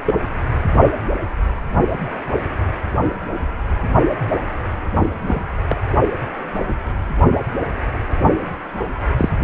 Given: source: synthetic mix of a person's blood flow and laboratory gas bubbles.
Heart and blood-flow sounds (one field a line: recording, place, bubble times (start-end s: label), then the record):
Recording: Doppler ultrasound of blood flow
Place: precordium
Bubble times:
0.06-0.14 s: bubbles
5.26-5.42 s: bubbles
5.68-5.77 s: bubbles
9.18-9.29 s: bubbles
From the record:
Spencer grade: 2 (many but less than half of the cardiac periods contain bubble signals, singularly or in groups)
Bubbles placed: only in the low amplitude regions of the cardiac cycle